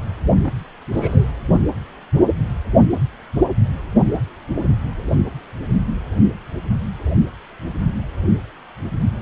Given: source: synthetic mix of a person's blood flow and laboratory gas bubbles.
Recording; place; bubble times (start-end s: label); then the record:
Doppler ultrasound of blood flow; precordium
0.45-0.65 s: bubbles
0.92-1.31 s: bubbles
From the record:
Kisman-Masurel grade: 111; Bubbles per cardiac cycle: 1 to 2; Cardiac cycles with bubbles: 1 to 10%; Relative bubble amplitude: barely perceptible (0.100 to 0.250); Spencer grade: 1 (occasional bubble signal discernible with the cardiac motion signal, with majority of cardiac periods free of bubbles); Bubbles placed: anywhere in the cardiac cycle